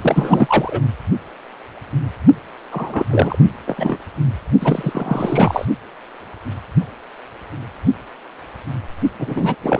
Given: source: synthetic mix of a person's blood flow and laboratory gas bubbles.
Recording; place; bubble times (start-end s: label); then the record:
Doppler ultrasound of blood flow; precordium
0.01-0.81 s: bubbles
2.71-3.05 s: bubbles
3.09-3.38 s: bubbles
3.67-3.97 s: bubbles
4.60-5.65 s: bubbles
9.19-9.56 s: bubbles
9.62-9.80 s: bubbles
From the record:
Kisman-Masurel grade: 333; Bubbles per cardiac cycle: rolling drumbeat, 9 or more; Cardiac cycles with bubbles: 50 to 99%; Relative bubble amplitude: loud (0.450 to 0.775); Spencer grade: 3 (all of the cardiac periods contain showers or single bubble signals, but not dominating or overriding the cardiac motion signals); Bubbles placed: only in the low amplitude regions of the cardiac cycle